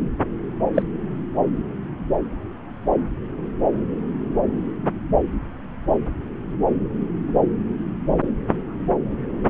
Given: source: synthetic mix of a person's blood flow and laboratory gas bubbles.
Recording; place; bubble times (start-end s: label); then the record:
Doppler ultrasound of blood flow; subclavian vein
0.74-0.83 s: bubbles
From the record:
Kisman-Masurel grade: 113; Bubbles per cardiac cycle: 1 to 2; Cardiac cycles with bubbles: 1 to 10%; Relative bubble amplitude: loud (0.450 to 0.775); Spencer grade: 1 (occasional bubble signal discernible with the cardiac motion signal, with majority of cardiac periods free of bubbles); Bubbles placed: anywhere in the cardiac cycle